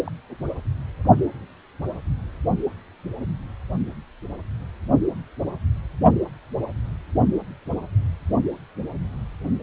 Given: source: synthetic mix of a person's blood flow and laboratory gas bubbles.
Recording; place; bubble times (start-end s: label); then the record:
Doppler ultrasound of blood flow; precordium
0.06-0.10 s: bubbles
From the record:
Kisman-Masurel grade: 111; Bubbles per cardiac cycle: 1 to 2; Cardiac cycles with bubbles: 1 to 10%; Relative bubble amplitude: barely perceptible (0.100 to 0.250); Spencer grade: 1 (occasional bubble signal discernible with the cardiac motion signal, with majority of cardiac periods free of bubbles); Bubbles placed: only in the low amplitude regions of the cardiac cycle